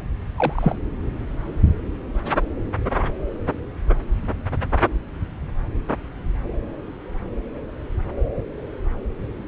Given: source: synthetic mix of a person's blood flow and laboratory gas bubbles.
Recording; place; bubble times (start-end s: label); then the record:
Doppler ultrasound of blood flow; subclavian vein
0.36-0.76 s: bubbles
From the record:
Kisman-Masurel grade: 112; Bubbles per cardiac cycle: 1 to 2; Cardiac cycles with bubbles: 1 to 10%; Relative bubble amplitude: moderate (0.250 to 0.450); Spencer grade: 1 (occasional bubble signal discernible with the cardiac motion signal, with majority of cardiac periods free of bubbles); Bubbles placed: anywhere in the cardiac cycle